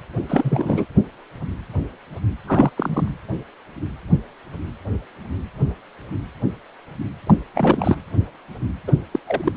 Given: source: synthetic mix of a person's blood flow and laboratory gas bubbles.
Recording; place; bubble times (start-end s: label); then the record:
Doppler ultrasound of blood flow; precordium
0.28-0.85 s: bubbles
2.47-2.69 s: bubbles
2.77-3.15 s: bubbles
7.26-7.35 s: bubbles
7.54-7.97 s: bubbles
8.87-8.92 s: bubbles
9.12-9.19 s: bubbles
9.27-9.52 s: bubbles
From the record:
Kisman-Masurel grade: 222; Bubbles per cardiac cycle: several, 3 to 8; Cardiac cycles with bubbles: 10 to 50%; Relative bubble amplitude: moderate (0.250 to 0.450); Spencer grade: 2 (many but less than half of the cardiac periods contain bubble signals, singularly or in groups); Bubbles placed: anywhere in the cardiac cycle